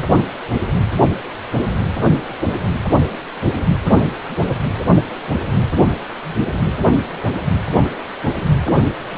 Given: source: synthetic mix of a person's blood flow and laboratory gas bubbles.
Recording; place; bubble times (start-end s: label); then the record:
Doppler ultrasound of blood flow; precordium
no bubbles
From the record:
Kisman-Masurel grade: 000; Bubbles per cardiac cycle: 0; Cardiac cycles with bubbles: 0%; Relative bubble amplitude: no bubbles discernible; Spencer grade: 0 (complete lack of bubble signals)